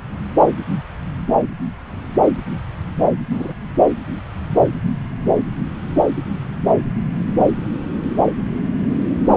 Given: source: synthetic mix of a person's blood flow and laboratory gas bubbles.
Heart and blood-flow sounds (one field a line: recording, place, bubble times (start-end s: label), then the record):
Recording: Doppler ultrasound of blood flow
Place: subclavian vein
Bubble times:
3.29-3.54 s: bubbles
From the record:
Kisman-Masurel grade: 112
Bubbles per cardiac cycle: 1 to 2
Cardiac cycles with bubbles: 1 to 10%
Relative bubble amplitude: moderate (0.250 to 0.450)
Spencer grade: 1 (occasional bubble signal discernible with the cardiac motion signal, with majority of cardiac periods free of bubbles)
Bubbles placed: anywhere in the cardiac cycle